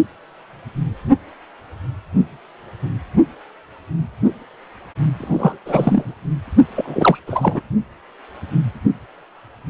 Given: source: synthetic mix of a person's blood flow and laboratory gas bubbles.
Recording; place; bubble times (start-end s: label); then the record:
Doppler ultrasound of blood flow; precordium
5.18-5.58 s: bubbles
5.65-6.13 s: bubbles
6.75-7.19 s: bubbles
7.27-7.61 s: bubbles
From the record:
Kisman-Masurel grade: 223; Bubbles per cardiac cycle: several, 3 to 8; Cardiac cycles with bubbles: 10 to 50%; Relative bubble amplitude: loud (0.450 to 0.775); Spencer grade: 2 (many but less than half of the cardiac periods contain bubble signals, singularly or in groups); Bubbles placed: only in the low amplitude regions of the cardiac cycle